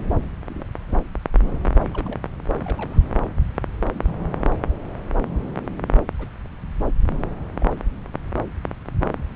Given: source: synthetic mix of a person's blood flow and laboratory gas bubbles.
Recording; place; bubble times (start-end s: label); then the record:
Doppler ultrasound of blood flow; subclavian vein
0.49-0.66 s: bubbles
0.88-0.94 s: bubbles
1.84-2.19 s: bubbles
2.60-2.98 s: bubbles
3.92-4.33 s: bubbles
6.18-6.28 s: bubbles
7.60-7.66 s: bubbles
From the record:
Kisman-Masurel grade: 121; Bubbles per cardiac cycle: 1 to 2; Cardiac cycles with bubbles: 10 to 50%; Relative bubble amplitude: barely perceptible (0.100 to 0.250); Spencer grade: 2 (many but less than half of the cardiac periods contain bubble signals, singularly or in groups); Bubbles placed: anywhere in the cardiac cycle